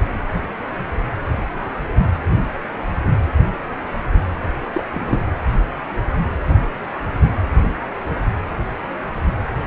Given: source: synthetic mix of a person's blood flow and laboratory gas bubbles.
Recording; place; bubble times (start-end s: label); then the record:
Doppler ultrasound of blood flow; precordium
4.73-4.83 s: bubbles
4.92-5.20 s: bubbles
From the record:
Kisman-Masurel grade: 112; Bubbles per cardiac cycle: 1 to 2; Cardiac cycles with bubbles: 1 to 10%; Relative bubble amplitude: moderate (0.250 to 0.450); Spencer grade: 1 (occasional bubble signal discernible with the cardiac motion signal, with majority of cardiac periods free of bubbles); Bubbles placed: anywhere in the cardiac cycle